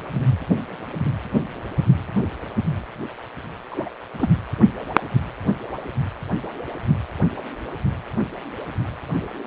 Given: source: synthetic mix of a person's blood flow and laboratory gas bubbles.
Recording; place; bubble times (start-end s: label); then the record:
Doppler ultrasound of blood flow; precordium
3.71-3.89 s: bubbles
4.19-4.29 s: bubbles
From the record:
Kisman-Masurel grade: 111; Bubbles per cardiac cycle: 1 to 2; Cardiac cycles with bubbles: 1 to 10%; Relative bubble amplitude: barely perceptible (0.100 to 0.250); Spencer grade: 1 (occasional bubble signal discernible with the cardiac motion signal, with majority of cardiac periods free of bubbles); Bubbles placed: anywhere in the cardiac cycle